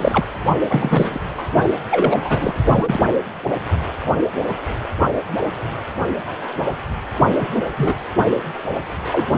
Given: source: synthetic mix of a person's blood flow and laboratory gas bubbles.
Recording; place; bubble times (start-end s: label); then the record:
Doppler ultrasound of blood flow; precordium
0.00-0.24 s: bubbles
0.69-1.19 s: bubbles
1.37-1.45 s: bubbles
1.91-2.53 s: bubbles
2.71-2.98 s: bubbles
7.39-7.48 s: bubbles
7.56-7.63 s: bubbles
7.77-7.94 s: bubbles
9.12-9.27 s: bubbles
9.33-9.38 s: bubbles
From the record:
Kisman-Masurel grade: 233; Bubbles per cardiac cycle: several, 3 to 8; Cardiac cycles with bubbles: 50 to 99%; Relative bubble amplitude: loud (0.450 to 0.775); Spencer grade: 3 (all of the cardiac periods contain showers or single bubble signals, but not dominating or overriding the cardiac motion signals); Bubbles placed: only in the low amplitude regions of the cardiac cycle